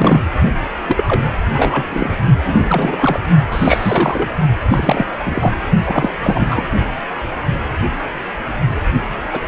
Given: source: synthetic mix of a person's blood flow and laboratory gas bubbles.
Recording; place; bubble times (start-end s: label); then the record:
Doppler ultrasound of blood flow; precordium
0.00-0.21 s: bubbles
0.88-1.04 s: bubbles
1.08-1.24 s: bubbles
1.54-1.86 s: bubbles
1.90-2.14 s: bubbles
2.45-3.20 s: bubbles
3.50-4.36 s: bubbles
4.70-5.07 s: bubbles
5.19-5.54 s: bubbles
5.84-6.10 s: bubbles
6.23-6.70 s: bubbles
9.32-9.42 s: bubbles
From the record:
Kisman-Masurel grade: 333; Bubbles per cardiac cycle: rolling drumbeat, 9 or more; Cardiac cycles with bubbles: 50 to 99%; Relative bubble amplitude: loud (0.450 to 0.775); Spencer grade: 3 (all of the cardiac periods contain showers or single bubble signals, but not dominating or overriding the cardiac motion signals); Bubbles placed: only in the low amplitude regions of the cardiac cycle